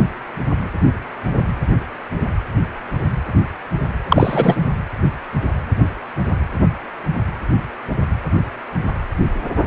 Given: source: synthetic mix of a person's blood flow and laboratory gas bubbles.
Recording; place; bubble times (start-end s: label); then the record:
Doppler ultrasound of blood flow; precordium
4.09-4.56 s: bubbles
From the record:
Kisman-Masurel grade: 213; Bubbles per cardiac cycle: several, 3 to 8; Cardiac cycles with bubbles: 1 to 10%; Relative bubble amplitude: loud (0.450 to 0.775); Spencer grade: 1 (occasional bubble signal discernible with the cardiac motion signal, with majority of cardiac periods free of bubbles); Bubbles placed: anywhere in the cardiac cycle